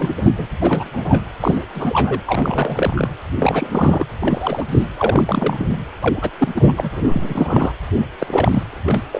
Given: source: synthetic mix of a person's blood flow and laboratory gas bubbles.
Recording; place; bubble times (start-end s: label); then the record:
Doppler ultrasound of blood flow; precordium
0.00-0.33 s: bubbles
0.37-0.47 s: bubbles
0.59-0.90 s: bubbles
0.93-1.24 s: bubbles
1.40-1.65 s: bubbles
1.74-2.21 s: bubbles
2.27-3.08 s: bubbles
3.39-4.05 s: bubbles
4.20-4.66 s: bubbles
4.68-4.87 s: bubbles
4.97-5.76 s: bubbles
6.00-6.30 s: bubbles
6.38-6.48 s: bubbles
6.54-7.73 s: bubbles
7.94-8.06 s: bubbles
8.17-8.63 s: bubbles
8.70-9.02 s: bubbles
9.12-9.20 s: bubbles
From the record:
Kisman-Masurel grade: 342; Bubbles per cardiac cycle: rolling drumbeat, 9 or more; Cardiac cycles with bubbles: 100%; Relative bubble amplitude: moderate (0.250 to 0.450); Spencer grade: 3 (all of the cardiac periods contain showers or single bubble signals, but not dominating or overriding the cardiac motion signals); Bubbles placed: anywhere in the cardiac cycle